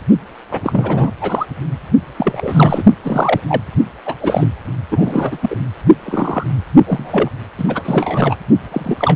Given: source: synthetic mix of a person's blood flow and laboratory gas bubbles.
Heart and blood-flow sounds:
Doppler ultrasound of blood flow; precordium
0.51-0.60 s: bubbles
0.64-1.11 s: bubbles
1.20-1.46 s: bubbles
2.18-2.83 s: bubbles
3.04-3.40 s: bubbles
3.47-3.62 s: bubbles
4.06-4.14 s: bubbles
4.21-4.48 s: bubbles
4.90-5.38 s: bubbles
5.42-5.55 s: bubbles
6.06-6.44 s: bubbles
6.86-7.29 s: bubbles
7.58-7.65 s: bubbles
7.68-7.83 s: bubbles
7.85-8.36 s: bubbles
8.71-9.16 s: bubbles
From the record:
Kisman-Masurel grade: 233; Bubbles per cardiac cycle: several, 3 to 8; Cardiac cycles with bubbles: 50 to 99%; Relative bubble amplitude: loud (0.450 to 0.775); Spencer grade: 3 (all of the cardiac periods contain showers or single bubble signals, but not dominating or overriding the cardiac motion signals); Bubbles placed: only in the low amplitude regions of the cardiac cycle

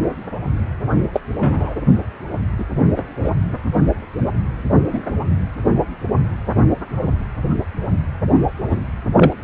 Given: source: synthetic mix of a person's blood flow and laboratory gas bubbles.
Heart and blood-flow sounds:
Doppler ultrasound of blood flow; precordium
1.14-1.20 s: bubbles
1.41-1.74 s: bubbles
2.58-2.65 s: bubbles
2.96-3.04 s: bubbles
3.23-3.30 s: bubbles
4.92-5.01 s: bubbles
8.71-8.79 s: bubbles
9.16-9.33 s: bubbles
From the record:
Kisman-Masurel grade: 123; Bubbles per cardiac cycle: 1 to 2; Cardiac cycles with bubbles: 10 to 50%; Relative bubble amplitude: loud (0.450 to 0.775); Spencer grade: 2 (many but less than half of the cardiac periods contain bubble signals, singularly or in groups); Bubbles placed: only in the low amplitude regions of the cardiac cycle

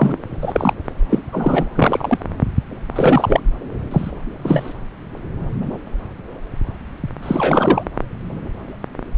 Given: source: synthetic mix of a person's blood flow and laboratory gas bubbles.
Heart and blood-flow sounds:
Doppler ultrasound of blood flow; subclavian vein
0.00-0.17 s: bubbles
0.42-0.74 s: bubbles
1.09-1.19 s: bubbles
1.32-1.68 s: bubbles
1.75-2.26 s: bubbles
2.95-3.41 s: bubbles
3.91-4.11 s: bubbles
4.43-4.73 s: bubbles
7.22-7.84 s: bubbles
From the record:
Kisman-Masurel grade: 233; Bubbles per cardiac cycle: several, 3 to 8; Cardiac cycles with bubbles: 50 to 99%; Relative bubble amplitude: loud (0.450 to 0.775); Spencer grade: 3 (all of the cardiac periods contain showers or single bubble signals, but not dominating or overriding the cardiac motion signals); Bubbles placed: anywhere in the cardiac cycle

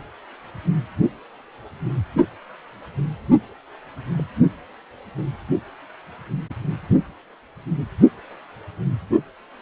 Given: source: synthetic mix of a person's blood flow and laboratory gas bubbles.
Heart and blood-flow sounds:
Doppler ultrasound of blood flow; precordium
4.12-4.24 s: bubbles
From the record:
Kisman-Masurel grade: 111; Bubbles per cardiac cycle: 1 to 2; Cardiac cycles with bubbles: 1 to 10%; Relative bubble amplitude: barely perceptible (0.100 to 0.250); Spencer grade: 1 (occasional bubble signal discernible with the cardiac motion signal, with majority of cardiac periods free of bubbles); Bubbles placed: only in the low amplitude regions of the cardiac cycle

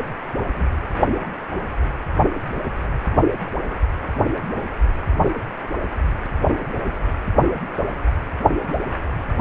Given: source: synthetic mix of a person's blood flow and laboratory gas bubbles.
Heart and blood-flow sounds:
Doppler ultrasound of blood flow; precordium
0.55-0.66 s: bubbles
From the record:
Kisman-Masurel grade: 112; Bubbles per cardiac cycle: 1 to 2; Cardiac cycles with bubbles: 1 to 10%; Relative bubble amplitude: moderate (0.250 to 0.450); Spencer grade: 1 (occasional bubble signal discernible with the cardiac motion signal, with majority of cardiac periods free of bubbles); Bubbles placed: only in the low amplitude regions of the cardiac cycle

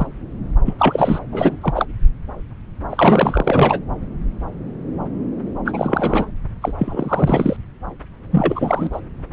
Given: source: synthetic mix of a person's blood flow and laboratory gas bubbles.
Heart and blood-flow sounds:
Doppler ultrasound of blood flow; subclavian vein
0.00-0.07 s: bubbles
0.65-1.19 s: bubbles
1.32-1.58 s: bubbles
1.61-1.86 s: bubbles
2.90-3.80 s: bubbles
5.65-6.31 s: bubbles
6.61-6.72 s: bubbles
6.78-7.56 s: bubbles
8.30-9.00 s: bubbles
From the record:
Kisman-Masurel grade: 333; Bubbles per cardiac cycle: rolling drumbeat, 9 or more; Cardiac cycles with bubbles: 50 to 99%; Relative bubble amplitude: loud (0.450 to 0.775); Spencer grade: 3 (all of the cardiac periods contain showers or single bubble signals, but not dominating or overriding the cardiac motion signals); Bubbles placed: anywhere in the cardiac cycle

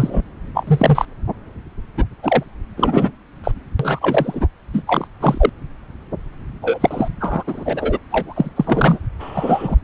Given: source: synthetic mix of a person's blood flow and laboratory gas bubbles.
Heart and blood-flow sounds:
Doppler ultrasound of blood flow; subclavian vein
0.00-0.23 s: bubbles
0.54-1.05 s: bubbles
1.97-2.04 s: bubbles
2.23-2.44 s: bubbles
2.77-3.11 s: bubbles
3.44-3.52 s: bubbles
3.79-4.47 s: bubbles
4.73-4.83 s: bubbles
4.87-5.07 s: bubbles
5.21-5.50 s: bubbles
6.62-7.08 s: bubbles
7.20-7.43 s: bubbles
7.47-7.99 s: bubbles
8.10-8.50 s: bubbles
8.56-8.99 s: bubbles
9.19-9.76 s: bubbles
From the record:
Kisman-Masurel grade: 243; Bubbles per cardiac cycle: several, 3 to 8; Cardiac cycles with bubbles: 100%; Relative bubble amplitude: loud (0.450 to 0.775); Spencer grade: 3 (all of the cardiac periods contain showers or single bubble signals, but not dominating or overriding the cardiac motion signals); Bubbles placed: anywhere in the cardiac cycle

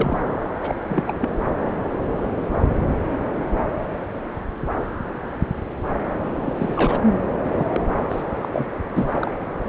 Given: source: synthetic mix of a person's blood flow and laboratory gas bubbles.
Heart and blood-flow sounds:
Doppler ultrasound of blood flow; subclavian vein
0.00-0.49 s: bubbles
0.61-0.75 s: bubbles
0.89-1.13 s: bubbles
1.21-1.29 s: bubbles
6.45-6.99 s: bubbles
7.51-7.66 s: bubbles
7.72-7.80 s: bubbles
8.10-8.23 s: bubbles
8.41-8.49 s: bubbles
8.53-8.67 s: bubbles
8.96-9.31 s: bubbles
From the record:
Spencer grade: 3 (all of the cardiac periods contain showers or single bubble signals, but not dominating or overriding the cardiac motion signals); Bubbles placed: anywhere in the cardiac cycle

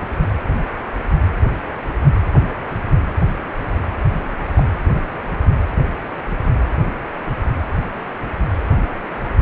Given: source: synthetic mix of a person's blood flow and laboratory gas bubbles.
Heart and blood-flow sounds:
Doppler ultrasound of blood flow; precordium
4.55-4.63 s: bubbles
From the record:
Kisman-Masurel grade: 112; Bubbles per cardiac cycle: 1 to 2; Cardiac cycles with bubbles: 1 to 10%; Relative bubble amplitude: moderate (0.250 to 0.450); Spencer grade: 1 (occasional bubble signal discernible with the cardiac motion signal, with majority of cardiac periods free of bubbles); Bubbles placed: anywhere in the cardiac cycle

